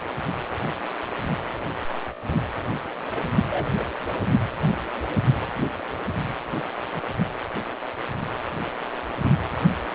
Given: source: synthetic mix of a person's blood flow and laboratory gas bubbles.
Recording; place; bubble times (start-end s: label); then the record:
Doppler ultrasound of blood flow; precordium
3.11-3.30 s: bubbles
3.50-3.88 s: bubbles
From the record:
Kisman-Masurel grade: 211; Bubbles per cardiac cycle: several, 3 to 8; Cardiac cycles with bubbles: 1 to 10%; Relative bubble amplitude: barely perceptible (0.100 to 0.250); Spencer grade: 1 (occasional bubble signal discernible with the cardiac motion signal, with majority of cardiac periods free of bubbles); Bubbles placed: anywhere in the cardiac cycle